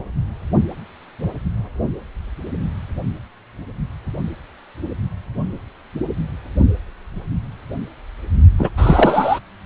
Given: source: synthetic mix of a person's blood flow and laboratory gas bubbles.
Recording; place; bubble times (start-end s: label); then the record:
Doppler ultrasound of blood flow; precordium
8.59-8.70 s: bubbles
8.77-9.39 s: bubbles
From the record:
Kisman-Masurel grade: 213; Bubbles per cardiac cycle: several, 3 to 8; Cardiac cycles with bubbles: 1 to 10%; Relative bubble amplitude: loud (0.450 to 0.775); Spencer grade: 1 (occasional bubble signal discernible with the cardiac motion signal, with majority of cardiac periods free of bubbles); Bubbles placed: only in the low amplitude regions of the cardiac cycle